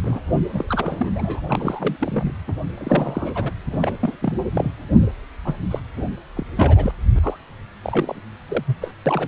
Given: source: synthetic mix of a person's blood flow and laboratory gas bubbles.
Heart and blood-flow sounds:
Doppler ultrasound of blood flow; precordium
0.02-0.19 s: bubbles
0.53-1.10 s: bubbles
1.15-1.40 s: bubbles
1.46-1.96 s: bubbles
1.98-2.36 s: bubbles
2.47-2.52 s: bubbles
2.77-3.52 s: bubbles
3.65-3.97 s: bubbles
4.00-4.16 s: bubbles
4.21-4.33 s: bubbles
4.38-4.42 s: bubbles
4.54-4.71 s: bubbles
5.45-5.53 s: bubbles
5.71-5.80 s: bubbles
5.97-6.07 s: bubbles
6.36-6.46 s: bubbles
6.57-6.93 s: bubbles
7.14-7.19 s: bubbles
7.23-7.37 s: bubbles
7.83-8.21 s: bubbles
8.48-8.63 s: bubbles
8.66-8.77 s: bubbles
8.81-8.92 s: bubbles
9.05-9.28 s: bubbles
From the record:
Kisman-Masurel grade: 342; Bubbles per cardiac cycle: rolling drumbeat, 9 or more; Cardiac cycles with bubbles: 100%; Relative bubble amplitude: moderate (0.250 to 0.450); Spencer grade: 3 (all of the cardiac periods contain showers or single bubble signals, but not dominating or overriding the cardiac motion signals); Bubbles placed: anywhere in the cardiac cycle

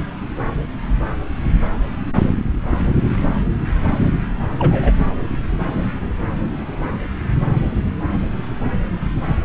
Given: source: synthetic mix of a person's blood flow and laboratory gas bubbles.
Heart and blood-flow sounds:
Doppler ultrasound of blood flow; subclavian vein
4.58-4.95 s: bubbles
From the record:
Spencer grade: 1 (occasional bubble signal discernible with the cardiac motion signal, with majority of cardiac periods free of bubbles); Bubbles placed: anywhere in the cardiac cycle

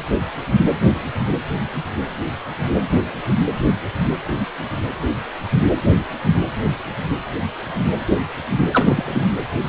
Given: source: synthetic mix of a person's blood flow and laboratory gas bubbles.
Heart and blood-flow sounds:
Doppler ultrasound of blood flow; precordium
8.71-9.31 s: bubbles
From the record:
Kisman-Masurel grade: 212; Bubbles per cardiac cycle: several, 3 to 8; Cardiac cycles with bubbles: 1 to 10%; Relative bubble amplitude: moderate (0.250 to 0.450); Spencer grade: 1 (occasional bubble signal discernible with the cardiac motion signal, with majority of cardiac periods free of bubbles); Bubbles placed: anywhere in the cardiac cycle

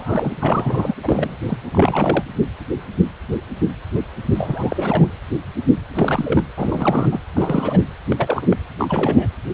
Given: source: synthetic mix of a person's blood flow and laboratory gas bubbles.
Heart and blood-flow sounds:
Doppler ultrasound of blood flow; precordium
0.00-0.30 s: bubbles
0.40-0.94 s: bubbles
1.03-1.36 s: bubbles
1.47-1.59 s: bubbles
1.73-2.23 s: bubbles
4.34-5.10 s: bubbles
5.93-6.43 s: bubbles
6.56-7.21 s: bubbles
7.35-7.80 s: bubbles
8.07-8.46 s: bubbles
8.49-8.56 s: bubbles
8.79-9.29 s: bubbles
From the record:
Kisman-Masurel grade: 332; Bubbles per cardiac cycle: rolling drumbeat, 9 or more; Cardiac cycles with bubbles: 50 to 99%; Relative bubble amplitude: moderate (0.250 to 0.450); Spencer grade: 3 (all of the cardiac periods contain showers or single bubble signals, but not dominating or overriding the cardiac motion signals); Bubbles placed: anywhere in the cardiac cycle

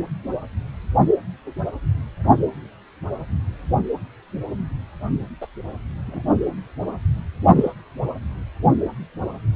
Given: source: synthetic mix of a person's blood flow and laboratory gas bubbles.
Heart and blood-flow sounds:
Doppler ultrasound of blood flow; precordium
5.41-5.47 s: bubbles
6.06-6.21 s: bubbles
7.55-7.70 s: bubbles
From the record:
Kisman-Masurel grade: 122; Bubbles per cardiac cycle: 1 to 2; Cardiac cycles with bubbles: 10 to 50%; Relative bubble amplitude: moderate (0.250 to 0.450); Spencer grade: 2 (many but less than half of the cardiac periods contain bubble signals, singularly or in groups); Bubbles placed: only in the low amplitude regions of the cardiac cycle

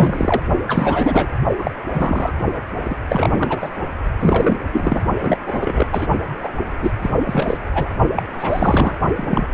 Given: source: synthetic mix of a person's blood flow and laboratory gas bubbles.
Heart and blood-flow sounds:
Doppler ultrasound of blood flow; precordium
0.00-0.42 s: bubbles
0.67-1.32 s: bubbles
1.59-1.75 s: bubbles
1.94-2.33 s: bubbles
2.85-2.98 s: bubbles
3.09-3.70 s: bubbles
4.20-4.58 s: bubbles
4.72-5.02 s: bubbles
5.22-5.38 s: bubbles
5.46-5.88 s: bubbles
5.92-6.07 s: bubbles
6.42-6.49 s: bubbles
6.82-6.92 s: bubbles
7.02-7.09 s: bubbles
7.25-7.58 s: bubbles
7.71-7.93 s: bubbles
8.16-8.22 s: bubbles
8.38-8.98 s: bubbles
9.17-9.46 s: bubbles
From the record:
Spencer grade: 3 (all of the cardiac periods contain showers or single bubble signals, but not dominating or overriding the cardiac motion signals); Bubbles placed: only in the low amplitude regions of the cardiac cycle

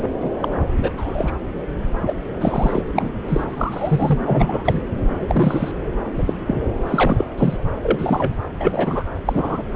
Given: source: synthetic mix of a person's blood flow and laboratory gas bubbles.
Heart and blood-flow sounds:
Doppler ultrasound of blood flow; subclavian vein
0.20-0.30 s: bubbles
0.40-0.48 s: bubbles
0.77-0.92 s: bubbles
0.96-1.32 s: bubbles
2.06-2.15 s: bubbles
2.41-2.82 s: bubbles
2.94-3.11 s: bubbles
3.28-3.45 s: bubbles
3.48-4.17 s: bubbles
4.25-4.82 s: bubbles
5.16-5.71 s: bubbles
6.17-6.23 s: bubbles
6.26-6.33 s: bubbles
6.46-6.62 s: bubbles
6.88-7.25 s: bubbles
7.38-7.58 s: bubbles
7.83-8.42 s: bubbles
8.59-9.04 s: bubbles
9.25-9.63 s: bubbles
From the record:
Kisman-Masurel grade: 243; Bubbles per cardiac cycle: several, 3 to 8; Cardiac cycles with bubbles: 100%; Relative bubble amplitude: loud (0.450 to 0.775); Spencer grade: 3 (all of the cardiac periods contain showers or single bubble signals, but not dominating or overriding the cardiac motion signals); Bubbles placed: anywhere in the cardiac cycle

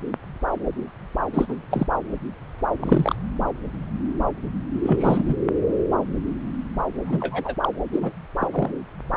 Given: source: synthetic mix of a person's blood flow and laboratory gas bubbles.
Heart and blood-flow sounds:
Doppler ultrasound of blood flow; subclavian vein
1.33-1.46 s: bubbles
1.48-1.55 s: bubbles
1.71-1.87 s: bubbles
2.79-3.16 s: bubbles
4.83-5.34 s: bubbles
7.05-7.55 s: bubbles
7.61-7.69 s: bubbles
7.92-8.12 s: bubbles
8.39-8.47 s: bubbles
8.51-8.71 s: bubbles
From the record:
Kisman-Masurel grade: 222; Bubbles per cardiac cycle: several, 3 to 8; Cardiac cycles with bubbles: 10 to 50%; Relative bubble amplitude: moderate (0.250 to 0.450); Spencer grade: 2 (many but less than half of the cardiac periods contain bubble signals, singularly or in groups); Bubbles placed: anywhere in the cardiac cycle

